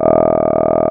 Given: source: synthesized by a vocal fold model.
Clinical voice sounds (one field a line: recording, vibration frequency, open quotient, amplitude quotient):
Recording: sustained vowel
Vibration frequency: 40 Hz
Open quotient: 0.1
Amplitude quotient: 1.2